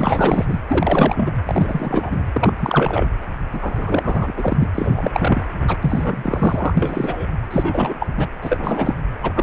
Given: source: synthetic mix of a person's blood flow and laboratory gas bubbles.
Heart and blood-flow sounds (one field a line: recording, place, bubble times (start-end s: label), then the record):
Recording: Doppler ultrasound of blood flow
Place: precordium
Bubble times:
0.00-0.45 s: bubbles
0.47-0.59 s: bubbles
0.69-1.32 s: bubbles
1.45-2.23 s: bubbles
2.33-2.52 s: bubbles
2.59-3.07 s: bubbles
3.53-4.56 s: bubbles
4.59-4.71 s: bubbles
4.75-5.11 s: bubbles
5.13-5.46 s: bubbles
5.67-5.76 s: bubbles
5.81-6.74 s: bubbles
6.77-7.26 s: bubbles
7.50-8.06 s: bubbles
8.17-8.28 s: bubbles
8.41-9.05 s: bubbles
9.23-9.43 s: bubbles
From the record:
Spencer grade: 3 (all of the cardiac periods contain showers or single bubble signals, but not dominating or overriding the cardiac motion signals)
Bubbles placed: anywhere in the cardiac cycle